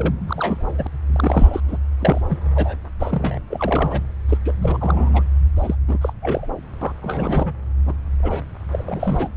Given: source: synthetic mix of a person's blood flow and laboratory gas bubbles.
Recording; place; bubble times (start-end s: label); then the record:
Doppler ultrasound of blood flow; subclavian vein
0.00-0.15 s: bubbles
0.28-0.87 s: bubbles
1.07-1.60 s: bubbles
1.68-1.77 s: bubbles
1.99-2.22 s: bubbles
2.27-2.38 s: bubbles
2.55-2.75 s: bubbles
3.00-3.39 s: bubbles
3.50-4.02 s: bubbles
4.28-4.38 s: bubbles
4.44-4.53 s: bubbles
4.61-5.23 s: bubbles
5.56-5.75 s: bubbles
5.87-5.98 s: bubbles
6.01-6.13 s: bubbles
6.21-6.46 s: bubbles
6.81-6.92 s: bubbles
7.02-7.52 s: bubbles
7.85-7.94 s: bubbles
8.19-8.43 s: bubbles
8.71-9.29 s: bubbles
From the record:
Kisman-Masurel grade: 342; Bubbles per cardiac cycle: rolling drumbeat, 9 or more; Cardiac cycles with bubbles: 100%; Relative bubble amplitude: moderate (0.250 to 0.450); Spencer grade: 3 (all of the cardiac periods contain showers or single bubble signals, but not dominating or overriding the cardiac motion signals); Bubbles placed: anywhere in the cardiac cycle